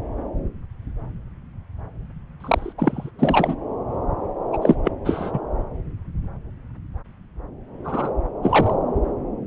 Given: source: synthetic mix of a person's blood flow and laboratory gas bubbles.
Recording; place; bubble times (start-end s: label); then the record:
Doppler ultrasound of blood flow; subclavian vein
2.40-2.73 s: bubbles
2.77-3.10 s: bubbles
3.19-3.56 s: bubbles
4.52-4.57 s: bubbles
4.61-4.76 s: bubbles
4.84-4.92 s: bubbles
5.04-5.39 s: bubbles
7.84-8.10 s: bubbles
8.43-8.76 s: bubbles
From the record:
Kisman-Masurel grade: 223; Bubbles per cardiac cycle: several, 3 to 8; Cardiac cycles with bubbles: 10 to 50%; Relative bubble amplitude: loud (0.450 to 0.775); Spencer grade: 2 (many but less than half of the cardiac periods contain bubble signals, singularly or in groups); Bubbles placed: anywhere in the cardiac cycle